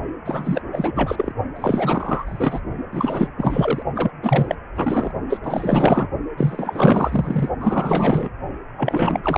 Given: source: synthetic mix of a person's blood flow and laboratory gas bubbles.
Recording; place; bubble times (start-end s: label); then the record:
Doppler ultrasound of blood flow; precordium
0.25-0.62 s: bubbles
0.72-1.33 s: bubbles
1.55-2.60 s: bubbles
2.92-3.28 s: bubbles
3.37-3.82 s: bubbles
3.94-4.11 s: bubbles
4.22-4.55 s: bubbles
4.75-5.11 s: bubbles
5.29-5.40 s: bubbles
5.43-6.07 s: bubbles
6.37-7.49 s: bubbles
7.60-8.29 s: bubbles
8.78-9.38 s: bubbles
From the record:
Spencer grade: 4 (maximum detectable bubble signal sounding continuously throughout systole and diastole of every cardiac period, and overriding the amplitude of the normal cardiac signals); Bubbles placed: only in the low amplitude regions of the cardiac cycle